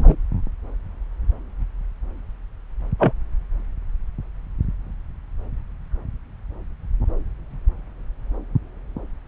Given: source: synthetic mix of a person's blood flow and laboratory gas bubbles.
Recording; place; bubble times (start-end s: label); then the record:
Doppler ultrasound of blood flow; subclavian vein
0.00-0.16 s: bubbles
2.99-3.12 s: bubbles
From the record:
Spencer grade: 1 (occasional bubble signal discernible with the cardiac motion signal, with majority of cardiac periods free of bubbles); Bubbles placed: anywhere in the cardiac cycle